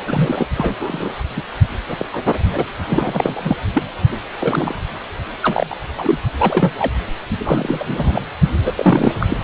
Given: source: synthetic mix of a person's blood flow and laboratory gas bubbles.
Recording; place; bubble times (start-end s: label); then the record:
Doppler ultrasound of blood flow; precordium
0.07-0.46 s: bubbles
0.56-0.76 s: bubbles
0.79-1.16 s: bubbles
1.36-1.42 s: bubbles
1.88-2.06 s: bubbles
2.12-2.18 s: bubbles
2.25-2.33 s: bubbles
2.52-2.65 s: bubbles
2.89-3.56 s: bubbles
3.73-3.83 s: bubbles
4.40-4.74 s: bubbles
5.42-5.77 s: bubbles
5.97-6.18 s: bubbles
6.39-6.72 s: bubbles
6.79-6.92 s: bubbles
7.38-8.21 s: bubbles
8.64-8.73 s: bubbles
8.75-9.14 s: bubbles
9.19-9.37 s: bubbles
From the record:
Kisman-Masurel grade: 243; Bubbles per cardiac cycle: several, 3 to 8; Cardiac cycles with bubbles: 100%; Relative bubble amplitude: loud (0.450 to 0.775); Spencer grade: 3 (all of the cardiac periods contain showers or single bubble signals, but not dominating or overriding the cardiac motion signals); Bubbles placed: only in the low amplitude regions of the cardiac cycle